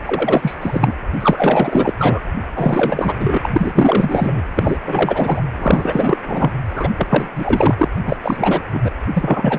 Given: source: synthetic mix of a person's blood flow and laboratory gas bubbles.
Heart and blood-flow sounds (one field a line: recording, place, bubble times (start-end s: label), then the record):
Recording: Doppler ultrasound of blood flow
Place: precordium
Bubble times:
0.05-0.57 s: bubbles
0.60-0.97 s: bubbles
1.20-1.92 s: bubbles
1.98-2.21 s: bubbles
2.54-3.14 s: bubbles
3.19-3.38 s: bubbles
3.42-4.43 s: bubbles
4.54-4.77 s: bubbles
4.86-5.42 s: bubbles
5.57-6.17 s: bubbles
6.27-6.51 s: bubbles
6.70-6.93 s: bubbles
6.97-7.29 s: bubbles
7.35-7.75 s: bubbles
7.78-7.88 s: bubbles
7.98-8.00 s: bubbles
8.04-8.17 s: bubbles
8.23-8.62 s: bubbles
8.73-8.80 s: bubbles
8.83-8.91 s: bubbles
9.14-9.59 s: bubbles
From the record:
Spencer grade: 4 (maximum detectable bubble signal sounding continuously throughout systole and diastole of every cardiac period, and overriding the amplitude of the normal cardiac signals)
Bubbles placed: anywhere in the cardiac cycle